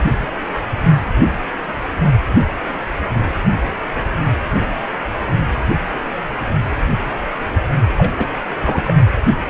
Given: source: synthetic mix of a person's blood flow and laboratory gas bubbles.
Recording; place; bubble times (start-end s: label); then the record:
Doppler ultrasound of blood flow; precordium
7.98-8.39 s: bubbles
8.61-8.94 s: bubbles
From the record:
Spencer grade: 1 (occasional bubble signal discernible with the cardiac motion signal, with majority of cardiac periods free of bubbles); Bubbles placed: anywhere in the cardiac cycle